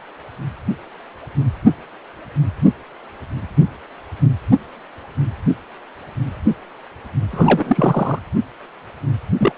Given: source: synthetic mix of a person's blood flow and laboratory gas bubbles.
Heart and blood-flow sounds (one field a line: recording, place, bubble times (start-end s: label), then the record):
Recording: Doppler ultrasound of blood flow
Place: precordium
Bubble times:
7.32-8.19 s: bubbles
9.38-9.52 s: bubbles
From the record:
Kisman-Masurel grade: 223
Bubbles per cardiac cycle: several, 3 to 8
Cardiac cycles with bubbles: 10 to 50%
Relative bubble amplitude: loud (0.450 to 0.775)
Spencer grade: 2 (many but less than half of the cardiac periods contain bubble signals, singularly or in groups)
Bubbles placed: anywhere in the cardiac cycle